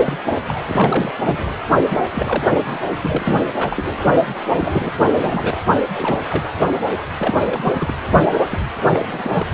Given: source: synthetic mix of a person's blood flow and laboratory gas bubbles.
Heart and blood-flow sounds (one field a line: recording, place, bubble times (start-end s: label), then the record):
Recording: Doppler ultrasound of blood flow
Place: precordium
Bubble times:
0.00-0.16 s: bubbles
0.48-0.62 s: bubbles
0.69-1.16 s: bubbles
1.23-1.55 s: bubbles
1.90-1.97 s: bubbles
2.11-2.46 s: bubbles
2.50-2.61 s: bubbles
2.65-2.79 s: bubbles
3.02-3.44 s: bubbles
3.56-3.88 s: bubbles
4.58-4.92 s: bubbles
5.21-5.60 s: bubbles
5.95-6.21 s: bubbles
6.29-6.50 s: bubbles
7.18-7.34 s: bubbles
7.46-7.94 s: bubbles
8.33-8.38 s: bubbles
8.49-8.60 s: bubbles
8.93-9.31 s: bubbles
9.33-9.46 s: bubbles
From the record:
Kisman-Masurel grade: 342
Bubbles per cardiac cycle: rolling drumbeat, 9 or more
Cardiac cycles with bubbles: 100%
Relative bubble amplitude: moderate (0.250 to 0.450)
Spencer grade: 3 (all of the cardiac periods contain showers or single bubble signals, but not dominating or overriding the cardiac motion signals)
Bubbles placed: only in the low amplitude regions of the cardiac cycle